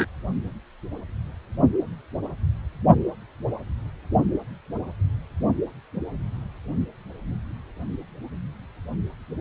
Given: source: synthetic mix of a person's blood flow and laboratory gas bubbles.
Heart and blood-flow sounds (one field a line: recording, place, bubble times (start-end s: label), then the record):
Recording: Doppler ultrasound of blood flow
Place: precordium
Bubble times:
0.00-0.06 s: bubbles
From the record:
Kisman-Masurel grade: 212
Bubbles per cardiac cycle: several, 3 to 8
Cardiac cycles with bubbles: 1 to 10%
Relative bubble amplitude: moderate (0.250 to 0.450)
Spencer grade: 1 (occasional bubble signal discernible with the cardiac motion signal, with majority of cardiac periods free of bubbles)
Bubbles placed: anywhere in the cardiac cycle